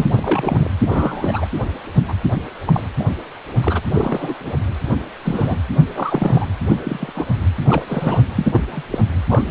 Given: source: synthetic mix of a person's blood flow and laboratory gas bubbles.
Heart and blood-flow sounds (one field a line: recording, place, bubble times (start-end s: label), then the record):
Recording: Doppler ultrasound of blood flow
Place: precordium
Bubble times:
0.00-0.07 s: bubbles
0.17-0.70 s: bubbles
0.81-1.45 s: bubbles
2.08-2.15 s: bubbles
2.67-2.84 s: bubbles
2.99-3.05 s: bubbles
3.62-3.81 s: bubbles
3.95-4.35 s: bubbles
4.39-4.56 s: bubbles
5.25-5.58 s: bubbles
5.94-6.46 s: bubbles
6.69-6.79 s: bubbles
6.83-7.29 s: bubbles
7.59-8.24 s: bubbles
8.36-8.61 s: bubbles
8.71-8.83 s: bubbles
8.91-8.99 s: bubbles
9.29-9.51 s: bubbles
From the record:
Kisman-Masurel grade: 242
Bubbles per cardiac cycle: several, 3 to 8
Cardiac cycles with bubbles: 100%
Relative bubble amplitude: moderate (0.250 to 0.450)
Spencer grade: 3 (all of the cardiac periods contain showers or single bubble signals, but not dominating or overriding the cardiac motion signals)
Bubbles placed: anywhere in the cardiac cycle